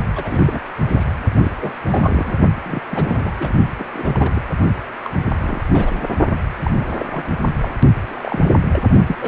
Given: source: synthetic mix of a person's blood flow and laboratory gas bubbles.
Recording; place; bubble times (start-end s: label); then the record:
Doppler ultrasound of blood flow; precordium
0.15-0.59 s: bubbles
0.85-1.12 s: bubbles
1.38-1.51 s: bubbles
1.60-1.73 s: bubbles
1.88-2.38 s: bubbles
2.65-2.81 s: bubbles
2.89-3.33 s: bubbles
3.40-3.53 s: bubbles
3.78-3.84 s: bubbles
3.94-4.32 s: bubbles
4.34-4.42 s: bubbles
5.04-5.09 s: bubbles
5.42-5.63 s: bubbles
5.71-6.04 s: bubbles
6.63-6.71 s: bubbles
6.76-7.05 s: bubbles
7.11-7.25 s: bubbles
7.61-7.72 s: bubbles
8.07-8.48 s: bubbles
8.72-8.88 s: bubbles
9.07-9.15 s: bubbles
9.20-9.28 s: bubbles
From the record:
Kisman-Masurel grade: 242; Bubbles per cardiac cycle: several, 3 to 8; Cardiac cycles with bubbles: 100%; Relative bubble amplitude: moderate (0.250 to 0.450); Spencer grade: 3 (all of the cardiac periods contain showers or single bubble signals, but not dominating or overriding the cardiac motion signals); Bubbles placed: only in the low amplitude regions of the cardiac cycle